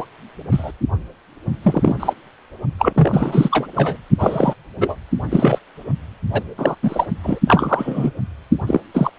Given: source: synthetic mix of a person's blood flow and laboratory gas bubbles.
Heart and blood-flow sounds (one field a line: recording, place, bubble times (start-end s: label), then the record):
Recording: Doppler ultrasound of blood flow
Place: precordium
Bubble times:
0.00-0.05 s: bubbles
0.52-0.72 s: bubbles
1.64-1.96 s: bubbles
2.00-2.13 s: bubbles
2.79-3.67 s: bubbles
3.76-3.97 s: bubbles
4.19-4.54 s: bubbles
4.80-4.95 s: bubbles
5.30-5.59 s: bubbles
6.32-6.44 s: bubbles
6.57-6.75 s: bubbles
6.82-7.05 s: bubbles
7.23-7.39 s: bubbles
7.47-8.11 s: bubbles
8.66-8.80 s: bubbles
8.94-9.11 s: bubbles
From the record:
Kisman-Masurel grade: 243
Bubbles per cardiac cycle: several, 3 to 8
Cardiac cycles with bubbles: 100%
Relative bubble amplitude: loud (0.450 to 0.775)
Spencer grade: 3 (all of the cardiac periods contain showers or single bubble signals, but not dominating or overriding the cardiac motion signals)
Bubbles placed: only in the low amplitude regions of the cardiac cycle